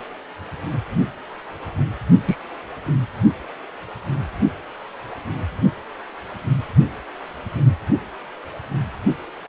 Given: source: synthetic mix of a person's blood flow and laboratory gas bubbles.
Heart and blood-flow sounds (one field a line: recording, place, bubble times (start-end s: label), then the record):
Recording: Doppler ultrasound of blood flow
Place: precordium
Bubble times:
2.27-2.36 s: bubbles
From the record:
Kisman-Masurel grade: 113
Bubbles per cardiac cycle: 1 to 2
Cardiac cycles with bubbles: 1 to 10%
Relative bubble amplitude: loud (0.450 to 0.775)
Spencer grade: 1 (occasional bubble signal discernible with the cardiac motion signal, with majority of cardiac periods free of bubbles)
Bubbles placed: only in the low amplitude regions of the cardiac cycle